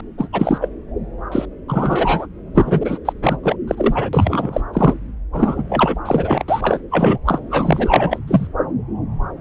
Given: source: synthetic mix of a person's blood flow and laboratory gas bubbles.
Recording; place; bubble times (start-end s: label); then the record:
Doppler ultrasound of blood flow; subclavian vein
0.17-0.29 s: bubbles
0.33-0.58 s: bubbles
0.61-0.69 s: bubbles
1.32-1.46 s: bubbles
1.68-2.27 s: bubbles
2.55-2.98 s: bubbles
3.05-3.13 s: bubbles
3.22-3.37 s: bubbles
3.43-3.56 s: bubbles
3.67-4.09 s: bubbles
4.13-4.61 s: bubbles
4.73-4.94 s: bubbles
5.33-5.62 s: bubbles
5.69-5.96 s: bubbles
6.05-6.44 s: bubbles
6.48-6.80 s: bubbles
6.91-7.18 s: bubbles
7.25-7.40 s: bubbles
7.50-8.19 s: bubbles
8.28-8.47 s: bubbles
From the record:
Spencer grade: 3 (all of the cardiac periods contain showers or single bubble signals, but not dominating or overriding the cardiac motion signals); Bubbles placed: anywhere in the cardiac cycle